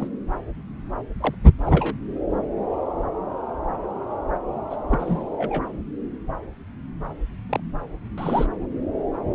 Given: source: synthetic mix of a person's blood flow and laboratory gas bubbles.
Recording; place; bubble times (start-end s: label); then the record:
Doppler ultrasound of blood flow; subclavian vein
0.00-0.08 s: bubbles
1.20-1.34 s: bubbles
1.66-1.95 s: bubbles
4.71-4.76 s: bubbles
4.88-5.24 s: bubbles
5.32-5.69 s: bubbles
7.49-7.60 s: bubbles
8.18-8.46 s: bubbles
From the record:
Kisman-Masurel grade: 221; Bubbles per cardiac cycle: several, 3 to 8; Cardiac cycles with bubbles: 10 to 50%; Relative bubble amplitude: barely perceptible (0.100 to 0.250); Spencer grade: 2 (many but less than half of the cardiac periods contain bubble signals, singularly or in groups); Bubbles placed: anywhere in the cardiac cycle